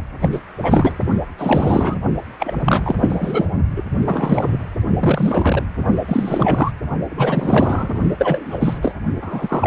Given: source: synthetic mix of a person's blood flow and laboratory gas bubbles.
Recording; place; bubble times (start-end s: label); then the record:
Doppler ultrasound of blood flow; precordium
0.20-0.39 s: bubbles
0.62-0.91 s: bubbles
1.38-1.98 s: bubbles
2.39-2.53 s: bubbles
2.65-2.81 s: bubbles
2.84-2.96 s: bubbles
3.00-3.46 s: bubbles
3.75-3.83 s: bubbles
4.07-4.49 s: bubbles
4.51-4.58 s: bubbles
5.00-5.62 s: bubbles
6.08-6.71 s: bubbles
7.09-8.01 s: bubbles
8.18-8.95 s: bubbles
9.22-9.67 s: bubbles
From the record:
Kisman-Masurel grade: 343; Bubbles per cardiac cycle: rolling drumbeat, 9 or more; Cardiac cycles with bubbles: 100%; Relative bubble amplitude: loud (0.450 to 0.775); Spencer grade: 3 (all of the cardiac periods contain showers or single bubble signals, but not dominating or overriding the cardiac motion signals); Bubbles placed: only in the low amplitude regions of the cardiac cycle